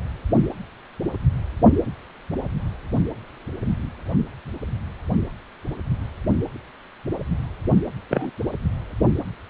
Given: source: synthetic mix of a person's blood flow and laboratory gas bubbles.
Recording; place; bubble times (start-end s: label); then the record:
Doppler ultrasound of blood flow; precordium
8.10-8.30 s: bubbles
From the record:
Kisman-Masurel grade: 112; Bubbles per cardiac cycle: 1 to 2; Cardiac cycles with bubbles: 1 to 10%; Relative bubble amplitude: moderate (0.250 to 0.450); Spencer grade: 1 (occasional bubble signal discernible with the cardiac motion signal, with majority of cardiac periods free of bubbles); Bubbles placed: only in the low amplitude regions of the cardiac cycle